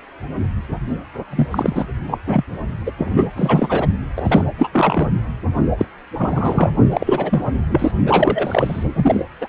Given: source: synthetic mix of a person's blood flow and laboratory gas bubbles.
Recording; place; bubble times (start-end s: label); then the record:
Doppler ultrasound of blood flow; precordium
1.31-1.47 s: bubbles
1.51-1.85 s: bubbles
2.07-2.18 s: bubbles
2.26-2.45 s: bubbles
2.86-2.92 s: bubbles
2.98-3.27 s: bubbles
3.35-3.87 s: bubbles
4.15-4.45 s: bubbles
4.58-4.69 s: bubbles
4.72-5.08 s: bubbles
5.78-5.86 s: bubbles
6.17-6.72 s: bubbles
6.89-7.44 s: bubbles
7.70-7.91 s: bubbles
8.06-9.24 s: bubbles
9.41-9.48 s: bubbles
From the record:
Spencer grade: 3 (all of the cardiac periods contain showers or single bubble signals, but not dominating or overriding the cardiac motion signals); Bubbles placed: only in the low amplitude regions of the cardiac cycle